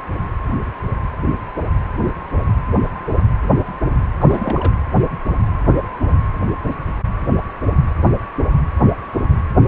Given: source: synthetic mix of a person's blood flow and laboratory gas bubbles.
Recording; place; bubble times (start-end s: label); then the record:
Doppler ultrasound of blood flow; precordium
4.16-4.72 s: bubbles
From the record:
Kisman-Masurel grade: 211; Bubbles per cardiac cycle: several, 3 to 8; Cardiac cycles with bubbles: 1 to 10%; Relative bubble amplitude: barely perceptible (0.100 to 0.250); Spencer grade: 1 (occasional bubble signal discernible with the cardiac motion signal, with majority of cardiac periods free of bubbles); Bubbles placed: anywhere in the cardiac cycle